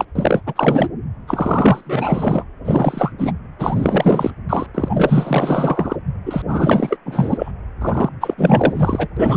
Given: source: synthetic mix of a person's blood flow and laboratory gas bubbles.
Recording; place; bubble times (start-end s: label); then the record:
Doppler ultrasound of blood flow; precordium
0.00-0.05 s: bubbles
0.15-0.41 s: bubbles
0.46-0.89 s: bubbles
1.27-2.45 s: bubbles
2.65-3.12 s: bubbles
3.18-3.32 s: bubbles
3.58-4.30 s: bubbles
4.49-4.67 s: bubbles
4.74-5.96 s: bubbles
6.25-6.42 s: bubbles
6.48-6.98 s: bubbles
7.05-7.52 s: bubbles
7.81-8.09 s: bubbles
8.21-8.34 s: bubbles
8.38-9.07 s: bubbles
9.17-9.37 s: bubbles
From the record:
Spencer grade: 4 (maximum detectable bubble signal sounding continuously throughout systole and diastole of every cardiac period, and overriding the amplitude of the normal cardiac signals); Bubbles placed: anywhere in the cardiac cycle